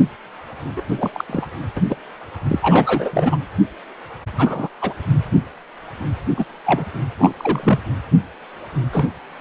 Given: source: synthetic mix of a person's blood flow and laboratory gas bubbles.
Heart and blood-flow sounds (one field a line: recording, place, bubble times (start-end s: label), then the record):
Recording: Doppler ultrasound of blood flow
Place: precordium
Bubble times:
0.76-0.83 s: bubbles
0.89-1.10 s: bubbles
1.12-1.25 s: bubbles
1.29-1.46 s: bubbles
1.77-1.81 s: bubbles
1.89-1.96 s: bubbles
2.49-2.59 s: bubbles
2.62-3.36 s: bubbles
4.37-4.69 s: bubbles
4.81-4.94 s: bubbles
6.37-6.45 s: bubbles
6.65-6.85 s: bubbles
7.18-7.35 s: bubbles
7.38-7.79 s: bubbles
8.92-9.06 s: bubbles
9.39-9.41 s: bubbles
From the record:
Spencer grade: 3 (all of the cardiac periods contain showers or single bubble signals, but not dominating or overriding the cardiac motion signals)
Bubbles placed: anywhere in the cardiac cycle